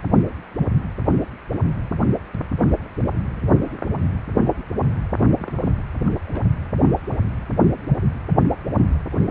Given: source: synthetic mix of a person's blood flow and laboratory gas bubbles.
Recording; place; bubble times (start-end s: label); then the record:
Doppler ultrasound of blood flow; precordium
5.39-5.71 s: bubbles
6.08-6.15 s: bubbles
6.25-6.38 s: bubbles
From the record:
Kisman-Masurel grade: 121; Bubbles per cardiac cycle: 1 to 2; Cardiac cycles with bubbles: 10 to 50%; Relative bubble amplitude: barely perceptible (0.100 to 0.250); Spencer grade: 2 (many but less than half of the cardiac periods contain bubble signals, singularly or in groups); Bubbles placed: anywhere in the cardiac cycle